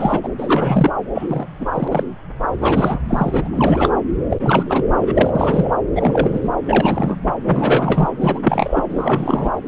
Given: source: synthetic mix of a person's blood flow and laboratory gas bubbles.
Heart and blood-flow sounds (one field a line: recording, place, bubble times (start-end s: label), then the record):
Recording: Doppler ultrasound of blood flow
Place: subclavian vein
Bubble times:
0.00-0.20 s: bubbles
0.23-0.29 s: bubbles
0.38-0.91 s: bubbles
1.14-2.04 s: bubbles
2.61-3.00 s: bubbles
3.08-3.49 s: bubbles
3.53-3.92 s: bubbles
4.30-4.36 s: bubbles
4.39-4.83 s: bubbles
5.00-5.69 s: bubbles
5.95-6.50 s: bubbles
6.67-7.17 s: bubbles
7.44-8.09 s: bubbles
8.21-8.40 s: bubbles
8.44-8.86 s: bubbles
8.88-9.52 s: bubbles
From the record:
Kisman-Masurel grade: 343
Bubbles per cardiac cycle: rolling drumbeat, 9 or more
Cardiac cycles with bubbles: 100%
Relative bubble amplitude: loud (0.450 to 0.775)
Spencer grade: 3 (all of the cardiac periods contain showers or single bubble signals, but not dominating or overriding the cardiac motion signals)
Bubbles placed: anywhere in the cardiac cycle